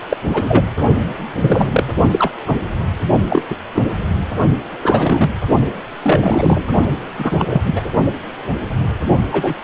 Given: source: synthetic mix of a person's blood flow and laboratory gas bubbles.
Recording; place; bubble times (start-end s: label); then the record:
Doppler ultrasound of blood flow; precordium
0.09-0.16 s: bubbles
0.33-0.65 s: bubbles
1.41-1.84 s: bubbles
2.11-2.32 s: bubbles
2.46-2.58 s: bubbles
3.29-3.45 s: bubbles
3.50-3.56 s: bubbles
3.74-3.83 s: bubbles
4.82-5.31 s: bubbles
6.03-6.69 s: bubbles
7.18-7.45 s: bubbles
7.49-7.62 s: bubbles
7.66-7.81 s: bubbles
9.31-9.54 s: bubbles
From the record:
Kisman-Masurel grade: 233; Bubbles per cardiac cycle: several, 3 to 8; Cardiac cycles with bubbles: 50 to 99%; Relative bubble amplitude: loud (0.450 to 0.775); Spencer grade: 3 (all of the cardiac periods contain showers or single bubble signals, but not dominating or overriding the cardiac motion signals); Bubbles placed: only in the low amplitude regions of the cardiac cycle